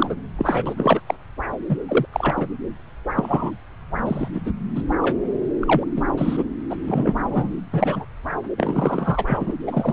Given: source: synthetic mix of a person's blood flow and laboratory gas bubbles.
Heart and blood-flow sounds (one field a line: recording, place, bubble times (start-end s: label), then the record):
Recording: Doppler ultrasound of blood flow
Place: subclavian vein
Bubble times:
0.00-0.15 s: bubbles
0.38-0.73 s: bubbles
0.77-1.00 s: bubbles
1.06-1.15 s: bubbles
1.68-1.76 s: bubbles
1.88-2.06 s: bubbles
2.12-2.48 s: bubbles
3.15-3.51 s: bubbles
4.05-4.29 s: bubbles
4.34-4.41 s: bubbles
4.46-4.51 s: bubbles
4.75-4.83 s: bubbles
5.01-5.17 s: bubbles
5.60-5.85 s: bubbles
5.96-6.02 s: bubbles
6.17-6.43 s: bubbles
6.70-6.76 s: bubbles
6.87-7.14 s: bubbles
7.20-7.65 s: bubbles
7.72-8.05 s: bubbles
8.58-9.54 s: bubbles
9.67-9.93 s: bubbles
From the record:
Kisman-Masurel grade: 233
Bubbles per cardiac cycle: several, 3 to 8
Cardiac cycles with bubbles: 50 to 99%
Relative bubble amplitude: loud (0.450 to 0.775)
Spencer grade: 3 (all of the cardiac periods contain showers or single bubble signals, but not dominating or overriding the cardiac motion signals)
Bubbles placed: anywhere in the cardiac cycle